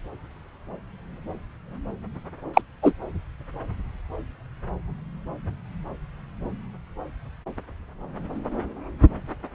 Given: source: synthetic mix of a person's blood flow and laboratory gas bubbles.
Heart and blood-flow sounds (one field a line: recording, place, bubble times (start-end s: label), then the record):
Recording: Doppler ultrasound of blood flow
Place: subclavian vein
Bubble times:
2.54-2.62 s: bubbles
2.82-2.93 s: bubbles
From the record:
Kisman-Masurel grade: 113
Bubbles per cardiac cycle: 1 to 2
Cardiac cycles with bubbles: 1 to 10%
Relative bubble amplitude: loud (0.450 to 0.775)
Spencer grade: 1 (occasional bubble signal discernible with the cardiac motion signal, with majority of cardiac periods free of bubbles)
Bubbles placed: anywhere in the cardiac cycle